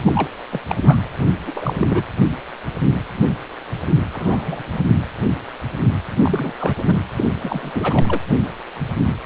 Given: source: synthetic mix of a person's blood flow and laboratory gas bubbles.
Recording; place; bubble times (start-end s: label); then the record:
Doppler ultrasound of blood flow; precordium
0.05-0.12 s: bubbles
0.15-0.29 s: bubbles
0.52-0.59 s: bubbles
0.68-0.76 s: bubbles
0.85-1.01 s: bubbles
1.47-2.03 s: bubbles
4.12-4.44 s: bubbles
4.46-4.62 s: bubbles
6.22-6.52 s: bubbles
6.58-6.75 s: bubbles
6.77-6.99 s: bubbles
7.17-7.25 s: bubbles
7.42-8.19 s: bubbles
From the record:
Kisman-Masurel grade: 222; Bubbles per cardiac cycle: several, 3 to 8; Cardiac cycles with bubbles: 10 to 50%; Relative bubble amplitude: moderate (0.250 to 0.450); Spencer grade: 2 (many but less than half of the cardiac periods contain bubble signals, singularly or in groups); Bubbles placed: anywhere in the cardiac cycle